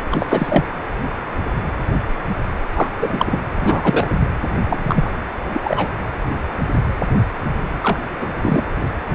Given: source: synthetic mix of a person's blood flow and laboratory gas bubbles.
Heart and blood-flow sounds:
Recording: Doppler ultrasound of blood flow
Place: precordium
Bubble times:
0.11-0.65 s: bubbles
2.73-2.90 s: bubbles
3.00-3.39 s: bubbles
3.57-4.29 s: bubbles
4.68-5.12 s: bubbles
5.54-5.61 s: bubbles
5.63-5.88 s: bubbles
7.81-7.99 s: bubbles
8.20-8.32 s: bubbles
8.42-8.64 s: bubbles
From the record:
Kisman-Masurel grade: 223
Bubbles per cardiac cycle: several, 3 to 8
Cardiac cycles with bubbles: 10 to 50%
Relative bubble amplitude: loud (0.450 to 0.775)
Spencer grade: 2 (many but less than half of the cardiac periods contain bubble signals, singularly or in groups)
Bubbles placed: anywhere in the cardiac cycle

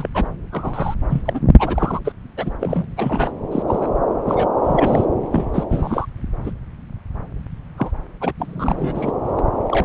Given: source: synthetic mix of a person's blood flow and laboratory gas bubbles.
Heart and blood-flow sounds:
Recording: Doppler ultrasound of blood flow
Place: subclavian vein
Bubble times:
0.00-0.07 s: bubbles
0.14-0.28 s: bubbles
0.52-0.94 s: bubbles
1.09-1.22 s: bubbles
1.24-1.40 s: bubbles
1.59-1.99 s: bubbles
2.05-2.12 s: bubbles
2.37-2.51 s: bubbles
2.61-2.85 s: bubbles
2.96-3.32 s: bubbles
3.52-3.62 s: bubbles
3.68-3.89 s: bubbles
4.25-4.49 s: bubbles
4.63-5.06 s: bubbles
5.30-5.45 s: bubbles
5.54-5.65 s: bubbles
5.70-6.06 s: bubbles
6.44-6.52 s: bubbles
7.78-7.91 s: bubbles
8.21-8.33 s: bubbles
8.38-9.11 s: bubbles
9.37-9.44 s: bubbles
9.68-9.85 s: bubbles
From the record:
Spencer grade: 3 (all of the cardiac periods contain showers or single bubble signals, but not dominating or overriding the cardiac motion signals)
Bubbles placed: anywhere in the cardiac cycle

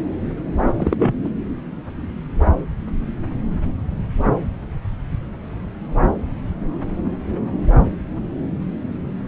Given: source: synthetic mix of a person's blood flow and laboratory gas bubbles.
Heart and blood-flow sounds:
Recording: Doppler ultrasound of blood flow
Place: subclavian vein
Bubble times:
0.78-0.96 s: bubbles
0.98-1.12 s: bubbles
1.24-1.29 s: bubbles
From the record:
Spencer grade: 1 (occasional bubble signal discernible with the cardiac motion signal, with majority of cardiac periods free of bubbles)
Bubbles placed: anywhere in the cardiac cycle

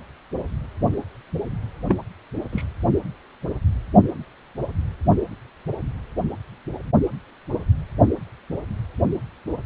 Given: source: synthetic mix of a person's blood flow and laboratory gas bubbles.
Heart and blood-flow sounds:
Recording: Doppler ultrasound of blood flow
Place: precordium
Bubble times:
1.89-2.00 s: bubbles
2.52-2.65 s: bubbles
From the record:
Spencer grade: 1 (occasional bubble signal discernible with the cardiac motion signal, with majority of cardiac periods free of bubbles)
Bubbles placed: anywhere in the cardiac cycle

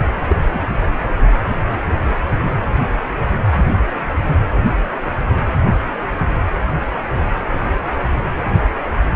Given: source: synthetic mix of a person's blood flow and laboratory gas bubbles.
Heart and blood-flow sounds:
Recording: Doppler ultrasound of blood flow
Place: precordium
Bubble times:
0.29-0.36 s: bubbles
0.53-0.61 s: bubbles
From the record:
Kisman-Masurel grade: 112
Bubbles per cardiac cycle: 1 to 2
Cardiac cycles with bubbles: 1 to 10%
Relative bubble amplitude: moderate (0.250 to 0.450)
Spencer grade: 1 (occasional bubble signal discernible with the cardiac motion signal, with majority of cardiac periods free of bubbles)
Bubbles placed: anywhere in the cardiac cycle

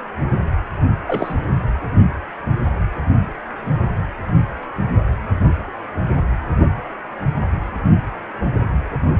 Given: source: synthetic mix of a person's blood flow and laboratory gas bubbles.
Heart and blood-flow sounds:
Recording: Doppler ultrasound of blood flow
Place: precordium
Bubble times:
1.07-1.33 s: bubbles
From the record:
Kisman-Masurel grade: 112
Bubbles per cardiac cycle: 1 to 2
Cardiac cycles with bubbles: 1 to 10%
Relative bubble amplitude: moderate (0.250 to 0.450)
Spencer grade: 1 (occasional bubble signal discernible with the cardiac motion signal, with majority of cardiac periods free of bubbles)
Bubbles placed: anywhere in the cardiac cycle

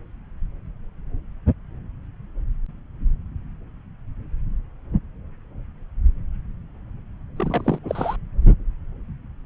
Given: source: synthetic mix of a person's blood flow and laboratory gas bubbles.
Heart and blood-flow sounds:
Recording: Doppler ultrasound of blood flow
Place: subclavian vein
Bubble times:
7.36-7.79 s: bubbles
7.84-8.16 s: bubbles
From the record:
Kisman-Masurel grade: 212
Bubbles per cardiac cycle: several, 3 to 8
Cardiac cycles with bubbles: 1 to 10%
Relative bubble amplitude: moderate (0.250 to 0.450)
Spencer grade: 1 (occasional bubble signal discernible with the cardiac motion signal, with majority of cardiac periods free of bubbles)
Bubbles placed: anywhere in the cardiac cycle

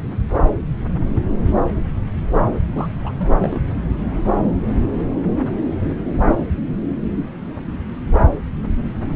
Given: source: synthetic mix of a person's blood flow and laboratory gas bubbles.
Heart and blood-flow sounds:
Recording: Doppler ultrasound of blood flow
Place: subclavian vein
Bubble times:
2.74-2.88 s: bubbles
3.04-3.12 s: bubbles
3.18-3.34 s: bubbles
3.38-3.59 s: bubbles
From the record:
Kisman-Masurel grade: 211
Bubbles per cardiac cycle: several, 3 to 8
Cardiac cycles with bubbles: 1 to 10%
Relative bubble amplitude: barely perceptible (0.100 to 0.250)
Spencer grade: 1 (occasional bubble signal discernible with the cardiac motion signal, with majority of cardiac periods free of bubbles)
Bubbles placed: anywhere in the cardiac cycle

